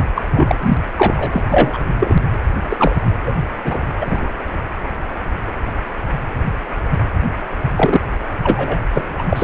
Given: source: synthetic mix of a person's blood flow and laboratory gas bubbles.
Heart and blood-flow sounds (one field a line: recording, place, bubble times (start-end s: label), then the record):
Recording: Doppler ultrasound of blood flow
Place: precordium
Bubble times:
0.00-0.04 s: bubbles
0.16-0.23 s: bubbles
0.31-0.55 s: bubbles
0.61-0.77 s: bubbles
0.96-1.43 s: bubbles
1.51-1.78 s: bubbles
1.99-2.22 s: bubbles
2.69-2.95 s: bubbles
3.27-3.32 s: bubbles
3.64-3.86 s: bubbles
4.01-4.27 s: bubbles
7.76-8.00 s: bubbles
8.43-8.80 s: bubbles
8.94-9.03 s: bubbles
9.18-9.23 s: bubbles
9.29-9.44 s: bubbles
From the record:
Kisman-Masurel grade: 333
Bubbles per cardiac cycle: rolling drumbeat, 9 or more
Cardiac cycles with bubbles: 50 to 99%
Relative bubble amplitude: loud (0.450 to 0.775)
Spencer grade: 3 (all of the cardiac periods contain showers or single bubble signals, but not dominating or overriding the cardiac motion signals)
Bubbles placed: anywhere in the cardiac cycle